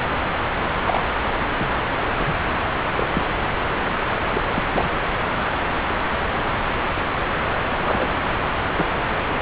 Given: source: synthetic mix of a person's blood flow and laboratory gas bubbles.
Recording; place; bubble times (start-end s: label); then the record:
Doppler ultrasound of blood flow; subclavian vein
0.86-1.00 s: bubbles
1.27-1.33 s: bubbles
1.54-1.67 s: bubbles
1.70-1.74 s: bubbles
2.17-2.23 s: bubbles
2.26-2.45 s: bubbles
2.96-3.06 s: bubbles
3.13-3.22 s: bubbles
4.33-4.42 s: bubbles
4.54-4.64 s: bubbles
4.74-4.89 s: bubbles
7.84-8.10 s: bubbles
8.25-8.37 s: bubbles
8.75-8.86 s: bubbles
From the record:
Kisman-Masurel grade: 221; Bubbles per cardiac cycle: several, 3 to 8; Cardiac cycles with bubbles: 10 to 50%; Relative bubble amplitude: barely perceptible (0.100 to 0.250); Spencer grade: 2 (many but less than half of the cardiac periods contain bubble signals, singularly or in groups); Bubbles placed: anywhere in the cardiac cycle